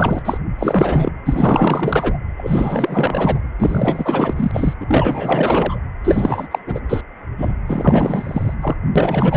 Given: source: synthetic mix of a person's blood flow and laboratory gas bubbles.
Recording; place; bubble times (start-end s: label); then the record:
Doppler ultrasound of blood flow; precordium
0.00-0.22 s: bubbles
0.24-0.38 s: bubbles
0.58-1.11 s: bubbles
1.25-2.17 s: bubbles
2.37-3.39 s: bubbles
3.58-4.74 s: bubbles
4.81-5.79 s: bubbles
6.04-6.49 s: bubbles
6.51-6.59 s: bubbles
6.66-6.80 s: bubbles
6.89-7.01 s: bubbles
7.38-7.53 s: bubbles
7.67-8.54 s: bubbles
8.60-8.76 s: bubbles
8.96-9.37 s: bubbles
From the record:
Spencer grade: 4 (maximum detectable bubble signal sounding continuously throughout systole and diastole of every cardiac period, and overriding the amplitude of the normal cardiac signals); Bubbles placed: anywhere in the cardiac cycle